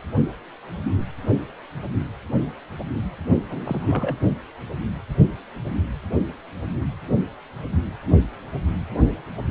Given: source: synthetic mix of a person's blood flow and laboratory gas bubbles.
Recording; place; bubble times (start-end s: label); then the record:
Doppler ultrasound of blood flow; precordium
3.49-4.16 s: bubbles
From the record:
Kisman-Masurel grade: 221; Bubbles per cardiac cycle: several, 3 to 8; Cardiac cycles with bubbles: 10 to 50%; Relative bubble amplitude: barely perceptible (0.100 to 0.250); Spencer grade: 2 (many but less than half of the cardiac periods contain bubble signals, singularly or in groups); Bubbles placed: only in the low amplitude regions of the cardiac cycle